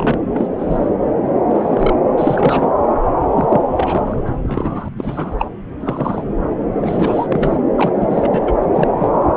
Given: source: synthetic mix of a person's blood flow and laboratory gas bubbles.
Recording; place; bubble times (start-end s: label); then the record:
Doppler ultrasound of blood flow; subclavian vein
0.00-0.17 s: bubbles
0.33-0.47 s: bubbles
0.58-0.90 s: bubbles
1.49-1.94 s: bubbles
2.18-2.72 s: bubbles
3.33-3.65 s: bubbles
3.73-4.23 s: bubbles
4.27-4.30 s: bubbles
4.42-4.88 s: bubbles
4.98-5.36 s: bubbles
5.38-5.46 s: bubbles
5.79-6.25 s: bubbles
6.71-7.57 s: bubbles
7.77-8.54 s: bubbles
8.62-8.67 s: bubbles
8.74-8.88 s: bubbles
8.98-9.17 s: bubbles
From the record:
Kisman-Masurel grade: 242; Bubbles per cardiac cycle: several, 3 to 8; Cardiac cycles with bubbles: 100%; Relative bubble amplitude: moderate (0.250 to 0.450); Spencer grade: 3 (all of the cardiac periods contain showers or single bubble signals, but not dominating or overriding the cardiac motion signals); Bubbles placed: anywhere in the cardiac cycle